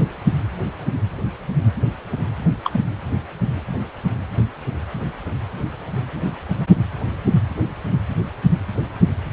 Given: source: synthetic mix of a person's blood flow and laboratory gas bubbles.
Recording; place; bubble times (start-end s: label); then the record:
Doppler ultrasound of blood flow; precordium
2.64-2.81 s: bubbles
From the record:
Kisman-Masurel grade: 112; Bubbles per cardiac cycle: 1 to 2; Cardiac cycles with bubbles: 1 to 10%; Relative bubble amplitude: moderate (0.250 to 0.450); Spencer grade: 1 (occasional bubble signal discernible with the cardiac motion signal, with majority of cardiac periods free of bubbles); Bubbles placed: anywhere in the cardiac cycle